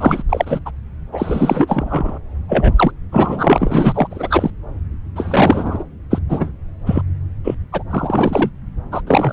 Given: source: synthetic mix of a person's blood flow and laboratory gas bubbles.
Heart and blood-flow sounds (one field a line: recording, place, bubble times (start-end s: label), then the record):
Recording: Doppler ultrasound of blood flow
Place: subclavian vein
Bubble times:
0.00-0.23 s: bubbles
0.29-0.59 s: bubbles
0.66-0.70 s: bubbles
1.12-2.19 s: bubbles
2.48-2.73 s: bubbles
2.76-2.92 s: bubbles
3.12-4.08 s: bubbles
4.10-4.50 s: bubbles
5.16-5.85 s: bubbles
6.10-6.18 s: bubbles
6.29-6.52 s: bubbles
6.86-7.01 s: bubbles
7.44-7.55 s: bubbles
7.72-7.83 s: bubbles
7.90-8.50 s: bubbles
8.91-9.02 s: bubbles
9.06-9.33 s: bubbles
From the record:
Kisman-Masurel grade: 343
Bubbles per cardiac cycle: rolling drumbeat, 9 or more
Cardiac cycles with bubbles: 100%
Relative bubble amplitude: loud (0.450 to 0.775)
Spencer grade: 3 (all of the cardiac periods contain showers or single bubble signals, but not dominating or overriding the cardiac motion signals)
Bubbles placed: anywhere in the cardiac cycle